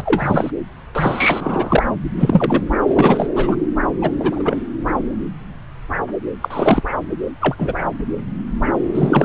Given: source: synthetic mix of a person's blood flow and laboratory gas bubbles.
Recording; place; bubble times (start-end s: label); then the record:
Doppler ultrasound of blood flow; subclavian vein
0.00-0.50 s: bubbles
0.95-1.83 s: bubbles
2.19-2.63 s: bubbles
2.83-3.29 s: bubbles
3.35-3.56 s: bubbles
4.01-4.10 s: bubbles
4.19-4.57 s: bubbles
6.41-6.82 s: bubbles
7.40-7.55 s: bubbles
7.58-7.79 s: bubbles
8.95-9.25 s: bubbles
From the record:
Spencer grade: 3 (all of the cardiac periods contain showers or single bubble signals, but not dominating or overriding the cardiac motion signals); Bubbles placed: anywhere in the cardiac cycle